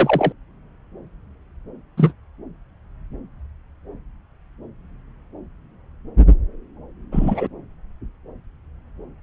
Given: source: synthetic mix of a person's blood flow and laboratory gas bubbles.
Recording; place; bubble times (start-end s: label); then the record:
Doppler ultrasound of blood flow; subclavian vein
0.00-0.33 s: bubbles
1.97-2.12 s: bubbles
7.12-7.47 s: bubbles
From the record:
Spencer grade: 2 (many but less than half of the cardiac periods contain bubble signals, singularly or in groups); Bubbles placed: anywhere in the cardiac cycle